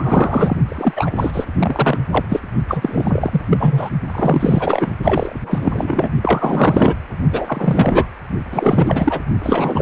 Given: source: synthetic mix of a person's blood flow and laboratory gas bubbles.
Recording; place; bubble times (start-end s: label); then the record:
Doppler ultrasound of blood flow; precordium
0.00-0.57 s: bubbles
0.65-1.10 s: bubbles
1.16-1.45 s: bubbles
1.58-1.98 s: bubbles
2.10-2.25 s: bubbles
2.29-2.40 s: bubbles
2.68-3.41 s: bubbles
3.50-3.90 s: bubbles
4.09-4.94 s: bubbles
5.03-5.33 s: bubbles
5.43-6.09 s: bubbles
6.22-6.95 s: bubbles
7.32-8.08 s: bubbles
8.51-9.21 s: bubbles
9.43-9.82 s: bubbles
From the record:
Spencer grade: 4 (maximum detectable bubble signal sounding continuously throughout systole and diastole of every cardiac period, and overriding the amplitude of the normal cardiac signals); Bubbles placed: only in the low amplitude regions of the cardiac cycle